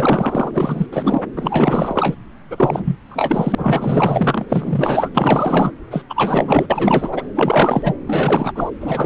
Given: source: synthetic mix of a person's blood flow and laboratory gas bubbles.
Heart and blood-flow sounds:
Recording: Doppler ultrasound of blood flow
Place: subclavian vein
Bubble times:
0.00-0.51 s: bubbles
0.54-0.86 s: bubbles
0.92-1.22 s: bubbles
1.36-2.15 s: bubbles
2.50-2.96 s: bubbles
3.08-4.46 s: bubbles
4.48-5.10 s: bubbles
5.14-5.72 s: bubbles
5.90-6.03 s: bubbles
6.10-6.66 s: bubbles
6.70-7.28 s: bubbles
7.35-7.96 s: bubbles
8.06-8.71 s: bubbles
8.80-9.06 s: bubbles
From the record:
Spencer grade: 4 (maximum detectable bubble signal sounding continuously throughout systole and diastole of every cardiac period, and overriding the amplitude of the normal cardiac signals)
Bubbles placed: anywhere in the cardiac cycle

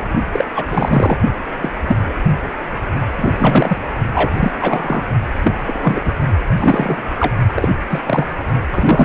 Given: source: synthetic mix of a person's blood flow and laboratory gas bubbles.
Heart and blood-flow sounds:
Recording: Doppler ultrasound of blood flow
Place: precordium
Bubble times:
0.33-0.46 s: bubbles
0.55-0.65 s: bubbles
0.68-1.19 s: bubbles
1.60-1.71 s: bubbles
1.88-1.96 s: bubbles
2.08-2.14 s: bubbles
3.17-3.32 s: bubbles
3.38-3.77 s: bubbles
4.14-4.52 s: bubbles
4.61-5.02 s: bubbles
5.44-5.53 s: bubbles
5.66-6.01 s: bubbles
6.04-6.13 s: bubbles
6.57-7.03 s: bubbles
7.19-7.34 s: bubbles
7.55-7.68 s: bubbles
7.89-8.01 s: bubbles
8.06-8.26 s: bubbles
8.72-9.05 s: bubbles
From the record:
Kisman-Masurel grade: 243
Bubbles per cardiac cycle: several, 3 to 8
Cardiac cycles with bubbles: 100%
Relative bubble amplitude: loud (0.450 to 0.775)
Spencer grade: 3 (all of the cardiac periods contain showers or single bubble signals, but not dominating or overriding the cardiac motion signals)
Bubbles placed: only in the low amplitude regions of the cardiac cycle

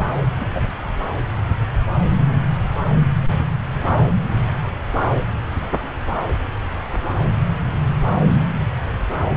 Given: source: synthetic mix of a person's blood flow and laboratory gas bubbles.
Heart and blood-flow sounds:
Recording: Doppler ultrasound of blood flow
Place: subclavian vein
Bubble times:
0.00-0.08 s: bubbles
0.37-0.47 s: bubbles
0.50-0.73 s: bubbles
From the record:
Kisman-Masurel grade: 111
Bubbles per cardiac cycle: 1 to 2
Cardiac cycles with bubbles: 1 to 10%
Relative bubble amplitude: barely perceptible (0.100 to 0.250)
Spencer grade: 1 (occasional bubble signal discernible with the cardiac motion signal, with majority of cardiac periods free of bubbles)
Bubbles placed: anywhere in the cardiac cycle

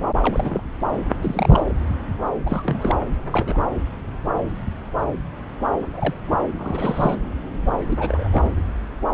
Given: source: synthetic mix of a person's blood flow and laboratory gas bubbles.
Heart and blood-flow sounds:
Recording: Doppler ultrasound of blood flow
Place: subclavian vein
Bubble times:
0.22-0.62 s: bubbles
1.21-1.73 s: bubbles
2.46-2.98 s: bubbles
3.32-3.58 s: bubbles
5.93-6.14 s: bubbles
6.26-6.36 s: bubbles
6.58-7.17 s: bubbles
7.89-8.28 s: bubbles
8.31-8.50 s: bubbles
From the record:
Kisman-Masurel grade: 232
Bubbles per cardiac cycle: several, 3 to 8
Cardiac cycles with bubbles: 50 to 99%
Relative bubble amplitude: moderate (0.250 to 0.450)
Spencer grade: 3 (all of the cardiac periods contain showers or single bubble signals, but not dominating or overriding the cardiac motion signals)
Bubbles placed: anywhere in the cardiac cycle

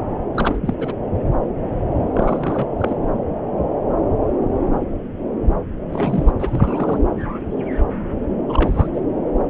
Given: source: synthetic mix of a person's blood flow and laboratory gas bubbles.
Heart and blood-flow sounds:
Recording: Doppler ultrasound of blood flow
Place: subclavian vein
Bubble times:
0.34-0.74 s: bubbles
0.79-0.94 s: bubbles
2.14-2.66 s: bubbles
2.78-2.98 s: bubbles
5.93-6.32 s: bubbles
6.39-6.99 s: bubbles
8.48-8.87 s: bubbles
8.94-9.01 s: bubbles
From the record:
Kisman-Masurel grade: 222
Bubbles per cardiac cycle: several, 3 to 8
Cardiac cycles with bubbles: 10 to 50%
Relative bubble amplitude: moderate (0.250 to 0.450)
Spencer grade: 2 (many but less than half of the cardiac periods contain bubble signals, singularly or in groups)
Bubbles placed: anywhere in the cardiac cycle

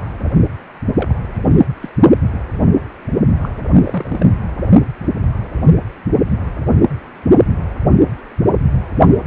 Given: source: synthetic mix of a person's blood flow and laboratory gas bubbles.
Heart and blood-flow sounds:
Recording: Doppler ultrasound of blood flow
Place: precordium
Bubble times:
0.96-1.14 s: bubbles
1.24-1.47 s: bubbles
1.51-1.66 s: bubbles
1.81-1.90 s: bubbles
3.41-3.49 s: bubbles
3.85-4.26 s: bubbles
From the record:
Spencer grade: 2 (many but less than half of the cardiac periods contain bubble signals, singularly or in groups)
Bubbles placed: only in the low amplitude regions of the cardiac cycle

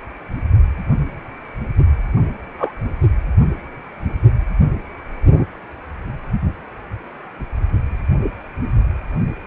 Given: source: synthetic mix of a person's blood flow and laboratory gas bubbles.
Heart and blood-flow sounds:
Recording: Doppler ultrasound of blood flow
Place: precordium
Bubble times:
2.59-2.72 s: bubbles
From the record:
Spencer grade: 1 (occasional bubble signal discernible with the cardiac motion signal, with majority of cardiac periods free of bubbles)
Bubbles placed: only in the low amplitude regions of the cardiac cycle

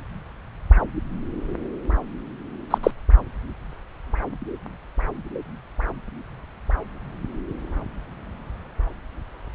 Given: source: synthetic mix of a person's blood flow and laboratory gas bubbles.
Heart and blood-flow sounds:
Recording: Doppler ultrasound of blood flow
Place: subclavian vein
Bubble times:
2.71-2.78 s: bubbles
2.83-2.91 s: bubbles
From the record:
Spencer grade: 1 (occasional bubble signal discernible with the cardiac motion signal, with majority of cardiac periods free of bubbles)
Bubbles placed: anywhere in the cardiac cycle

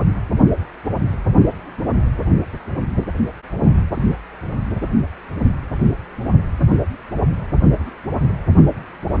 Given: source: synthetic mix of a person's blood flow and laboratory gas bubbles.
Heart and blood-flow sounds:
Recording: Doppler ultrasound of blood flow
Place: precordium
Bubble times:
3.92-4.06 s: bubbles
7.85-7.91 s: bubbles
8.28-8.33 s: bubbles
From the record:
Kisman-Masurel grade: 121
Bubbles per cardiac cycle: 1 to 2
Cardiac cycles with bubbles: 10 to 50%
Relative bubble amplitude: barely perceptible (0.100 to 0.250)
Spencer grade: 2 (many but less than half of the cardiac periods contain bubble signals, singularly or in groups)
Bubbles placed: anywhere in the cardiac cycle

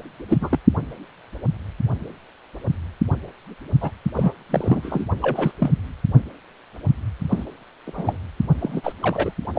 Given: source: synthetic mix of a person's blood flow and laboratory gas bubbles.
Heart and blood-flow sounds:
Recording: Doppler ultrasound of blood flow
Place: precordium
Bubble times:
0.28-0.59 s: bubbles
3.80-3.91 s: bubbles
4.16-4.33 s: bubbles
4.50-5.05 s: bubbles
5.21-5.51 s: bubbles
5.59-5.71 s: bubbles
7.29-7.43 s: bubbles
7.86-8.18 s: bubbles
8.60-8.93 s: bubbles
9.03-9.32 s: bubbles
9.54-9.59 s: bubbles
From the record:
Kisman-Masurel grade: 232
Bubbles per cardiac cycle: several, 3 to 8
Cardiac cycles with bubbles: 50 to 99%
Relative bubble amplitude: moderate (0.250 to 0.450)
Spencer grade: 3 (all of the cardiac periods contain showers or single bubble signals, but not dominating or overriding the cardiac motion signals)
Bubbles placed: only in the low amplitude regions of the cardiac cycle

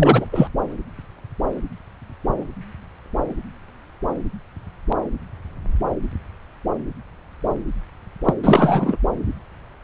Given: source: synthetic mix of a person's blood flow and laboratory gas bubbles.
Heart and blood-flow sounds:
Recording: Doppler ultrasound of blood flow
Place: subclavian vein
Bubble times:
0.00-0.26 s: bubbles
0.32-0.48 s: bubbles
8.25-8.34 s: bubbles
8.43-8.97 s: bubbles
From the record:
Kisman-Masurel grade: 223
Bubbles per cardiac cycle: several, 3 to 8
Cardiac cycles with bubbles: 10 to 50%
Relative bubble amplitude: loud (0.450 to 0.775)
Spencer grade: 2 (many but less than half of the cardiac periods contain bubble signals, singularly or in groups)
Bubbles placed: anywhere in the cardiac cycle

